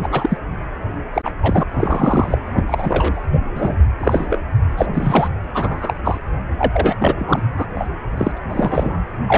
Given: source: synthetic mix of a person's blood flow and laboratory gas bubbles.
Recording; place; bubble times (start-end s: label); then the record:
Doppler ultrasound of blood flow; precordium
0.00-0.09 s: bubbles
0.11-0.38 s: bubbles
1.13-1.22 s: bubbles
1.25-1.31 s: bubbles
1.43-1.64 s: bubbles
1.77-2.38 s: bubbles
2.54-3.25 s: bubbles
3.32-3.40 s: bubbles
3.55-3.76 s: bubbles
4.00-4.27 s: bubbles
4.29-4.42 s: bubbles
4.77-4.86 s: bubbles
4.94-5.29 s: bubbles
5.53-5.94 s: bubbles
6.04-6.19 s: bubbles
6.58-7.15 s: bubbles
7.18-7.43 s: bubbles
7.56-7.66 s: bubbles
7.75-7.88 s: bubbles
8.17-8.31 s: bubbles
8.36-8.38 s: bubbles
8.50-8.99 s: bubbles
9.26-9.38 s: bubbles
From the record:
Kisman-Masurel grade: 243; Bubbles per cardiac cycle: several, 3 to 8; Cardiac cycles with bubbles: 100%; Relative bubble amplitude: loud (0.450 to 0.775); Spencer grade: 3 (all of the cardiac periods contain showers or single bubble signals, but not dominating or overriding the cardiac motion signals); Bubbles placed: anywhere in the cardiac cycle